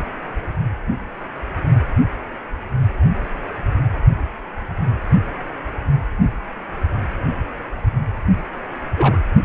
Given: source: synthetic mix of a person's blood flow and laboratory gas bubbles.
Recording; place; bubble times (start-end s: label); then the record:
Doppler ultrasound of blood flow; precordium
8.97-9.17 s: bubbles
From the record:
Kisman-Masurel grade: 112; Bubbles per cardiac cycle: 1 to 2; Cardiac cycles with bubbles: 1 to 10%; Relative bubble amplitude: moderate (0.250 to 0.450); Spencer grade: 1 (occasional bubble signal discernible with the cardiac motion signal, with majority of cardiac periods free of bubbles); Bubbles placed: only in the low amplitude regions of the cardiac cycle